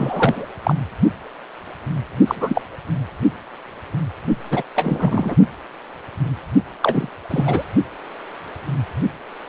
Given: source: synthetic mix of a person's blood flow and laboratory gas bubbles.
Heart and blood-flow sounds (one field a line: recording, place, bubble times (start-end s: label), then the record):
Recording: Doppler ultrasound of blood flow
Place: precordium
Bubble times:
0.00-0.47 s: bubbles
0.63-0.75 s: bubbles
2.27-2.62 s: bubbles
4.50-4.63 s: bubbles
4.75-5.36 s: bubbles
6.81-7.09 s: bubbles
7.30-7.64 s: bubbles
From the record:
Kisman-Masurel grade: 223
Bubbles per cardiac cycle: several, 3 to 8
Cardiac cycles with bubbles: 10 to 50%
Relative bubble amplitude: loud (0.450 to 0.775)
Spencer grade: 2 (many but less than half of the cardiac periods contain bubble signals, singularly or in groups)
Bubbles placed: only in the low amplitude regions of the cardiac cycle